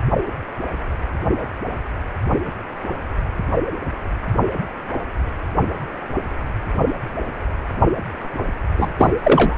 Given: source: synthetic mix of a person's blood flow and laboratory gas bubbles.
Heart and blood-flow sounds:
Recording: Doppler ultrasound of blood flow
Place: precordium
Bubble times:
8.77-8.91 s: bubbles
8.97-9.12 s: bubbles
9.24-9.57 s: bubbles
From the record:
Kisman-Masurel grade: 223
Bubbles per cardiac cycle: several, 3 to 8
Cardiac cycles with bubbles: 10 to 50%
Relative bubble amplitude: loud (0.450 to 0.775)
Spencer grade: 2 (many but less than half of the cardiac periods contain bubble signals, singularly or in groups)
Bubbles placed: anywhere in the cardiac cycle

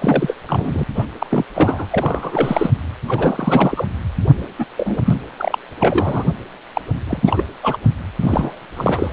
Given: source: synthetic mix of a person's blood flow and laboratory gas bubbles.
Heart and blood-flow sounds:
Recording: Doppler ultrasound of blood flow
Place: precordium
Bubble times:
0.00-0.36 s: bubbles
0.48-0.83 s: bubbles
0.95-1.05 s: bubbles
1.19-1.27 s: bubbles
1.30-1.45 s: bubbles
1.55-1.87 s: bubbles
1.90-2.71 s: bubbles
3.07-3.85 s: bubbles
4.59-4.65 s: bubbles
4.77-4.98 s: bubbles
5.05-5.14 s: bubbles
5.38-5.58 s: bubbles
5.80-6.24 s: bubbles
6.74-6.81 s: bubbles
7.08-7.45 s: bubbles
7.62-7.77 s: bubbles
8.20-8.60 s: bubbles
8.77-9.13 s: bubbles
From the record:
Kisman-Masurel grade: 342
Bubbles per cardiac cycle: rolling drumbeat, 9 or more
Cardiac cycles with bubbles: 100%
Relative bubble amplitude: moderate (0.250 to 0.450)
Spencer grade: 3 (all of the cardiac periods contain showers or single bubble signals, but not dominating or overriding the cardiac motion signals)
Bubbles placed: anywhere in the cardiac cycle

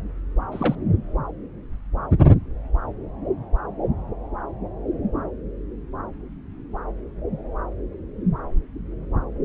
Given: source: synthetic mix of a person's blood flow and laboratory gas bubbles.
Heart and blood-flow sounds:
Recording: Doppler ultrasound of blood flow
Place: subclavian vein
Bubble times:
0.52-0.75 s: bubbles
From the record:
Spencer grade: 1 (occasional bubble signal discernible with the cardiac motion signal, with majority of cardiac periods free of bubbles)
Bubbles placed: anywhere in the cardiac cycle

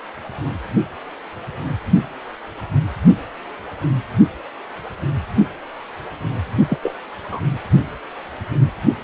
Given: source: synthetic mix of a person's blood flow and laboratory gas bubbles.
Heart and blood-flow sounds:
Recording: Doppler ultrasound of blood flow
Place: precordium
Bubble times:
6.68-6.78 s: bubbles
6.83-6.93 s: bubbles
7.31-7.40 s: bubbles
From the record:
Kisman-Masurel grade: 212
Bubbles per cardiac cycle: several, 3 to 8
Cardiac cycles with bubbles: 1 to 10%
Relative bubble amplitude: moderate (0.250 to 0.450)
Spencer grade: 1 (occasional bubble signal discernible with the cardiac motion signal, with majority of cardiac periods free of bubbles)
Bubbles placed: anywhere in the cardiac cycle

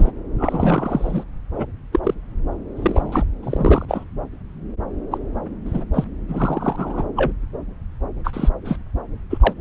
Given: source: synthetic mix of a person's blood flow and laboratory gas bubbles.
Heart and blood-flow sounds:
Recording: Doppler ultrasound of blood flow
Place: subclavian vein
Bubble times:
0.00-0.10 s: bubbles
0.38-1.24 s: bubbles
1.56-1.66 s: bubbles
1.92-1.99 s: bubbles
2.03-2.14 s: bubbles
2.76-3.24 s: bubbles
3.42-3.85 s: bubbles
3.88-4.04 s: bubbles
5.11-5.18 s: bubbles
5.65-5.85 s: bubbles
5.93-6.04 s: bubbles
6.29-7.04 s: bubbles
7.16-7.32 s: bubbles
8.24-8.49 s: bubbles
8.64-8.77 s: bubbles
9.29-9.54 s: bubbles
From the record:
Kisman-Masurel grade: 233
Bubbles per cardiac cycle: several, 3 to 8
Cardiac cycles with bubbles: 50 to 99%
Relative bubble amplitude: loud (0.450 to 0.775)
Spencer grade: 3 (all of the cardiac periods contain showers or single bubble signals, but not dominating or overriding the cardiac motion signals)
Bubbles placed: anywhere in the cardiac cycle

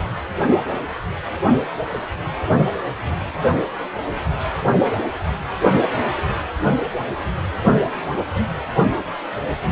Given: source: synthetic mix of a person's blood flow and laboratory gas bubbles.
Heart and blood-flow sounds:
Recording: Doppler ultrasound of blood flow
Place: precordium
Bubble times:
1.92-2.00 s: bubbles
From the record:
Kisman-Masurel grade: 121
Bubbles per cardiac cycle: 1 to 2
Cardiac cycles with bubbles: 10 to 50%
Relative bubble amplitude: barely perceptible (0.100 to 0.250)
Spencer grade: 2 (many but less than half of the cardiac periods contain bubble signals, singularly or in groups)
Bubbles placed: anywhere in the cardiac cycle

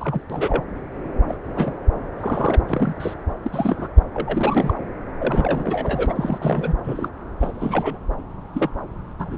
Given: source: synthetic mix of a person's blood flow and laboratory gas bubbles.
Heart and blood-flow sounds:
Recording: Doppler ultrasound of blood flow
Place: subclavian vein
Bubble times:
0.00-0.22 s: bubbles
0.29-0.64 s: bubbles
1.28-1.37 s: bubbles
1.46-1.78 s: bubbles
2.17-2.64 s: bubbles
2.68-3.15 s: bubbles
3.43-3.88 s: bubbles
4.14-4.74 s: bubbles
5.19-6.75 s: bubbles
6.84-7.08 s: bubbles
7.40-7.98 s: bubbles
8.54-8.70 s: bubbles
9.19-9.38 s: bubbles
From the record:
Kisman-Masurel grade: 242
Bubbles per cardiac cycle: several, 3 to 8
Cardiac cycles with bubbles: 100%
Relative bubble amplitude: moderate (0.250 to 0.450)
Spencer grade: 3 (all of the cardiac periods contain showers or single bubble signals, but not dominating or overriding the cardiac motion signals)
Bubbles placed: anywhere in the cardiac cycle

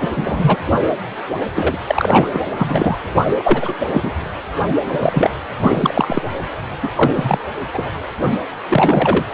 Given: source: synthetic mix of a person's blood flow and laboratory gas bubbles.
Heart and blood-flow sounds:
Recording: Doppler ultrasound of blood flow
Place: precordium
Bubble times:
0.01-0.09 s: bubbles
0.15-0.57 s: bubbles
1.55-1.77 s: bubbles
1.86-2.28 s: bubbles
2.33-2.40 s: bubbles
2.58-2.96 s: bubbles
3.38-3.75 s: bubbles
3.80-4.12 s: bubbles
4.88-5.30 s: bubbles
5.62-6.22 s: bubbles
6.82-6.89 s: bubbles
6.96-7.38 s: bubbles
7.74-7.93 s: bubbles
8.69-9.26 s: bubbles
From the record:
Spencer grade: 3 (all of the cardiac periods contain showers or single bubble signals, but not dominating or overriding the cardiac motion signals)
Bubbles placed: anywhere in the cardiac cycle

